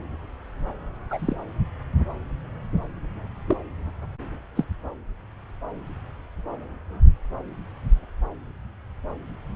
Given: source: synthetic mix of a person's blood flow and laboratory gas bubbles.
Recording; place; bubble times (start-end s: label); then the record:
Doppler ultrasound of blood flow; subclavian vein
1.10-1.37 s: bubbles
3.48-3.56 s: bubbles
4.55-4.65 s: bubbles
From the record:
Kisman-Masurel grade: 122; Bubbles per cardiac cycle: 1 to 2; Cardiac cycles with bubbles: 10 to 50%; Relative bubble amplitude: moderate (0.250 to 0.450); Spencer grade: 2 (many but less than half of the cardiac periods contain bubble signals, singularly or in groups); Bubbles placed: anywhere in the cardiac cycle